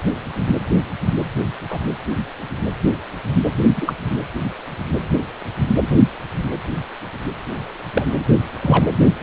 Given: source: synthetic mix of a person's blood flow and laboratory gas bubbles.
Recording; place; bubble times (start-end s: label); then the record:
Doppler ultrasound of blood flow; precordium
1.70-1.79 s: bubbles
3.75-3.94 s: bubbles
7.95-8.05 s: bubbles
8.62-8.86 s: bubbles
From the record:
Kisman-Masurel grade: 123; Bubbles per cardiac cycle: 1 to 2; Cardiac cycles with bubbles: 10 to 50%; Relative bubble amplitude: loud (0.450 to 0.775); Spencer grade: 2 (many but less than half of the cardiac periods contain bubble signals, singularly or in groups); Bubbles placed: anywhere in the cardiac cycle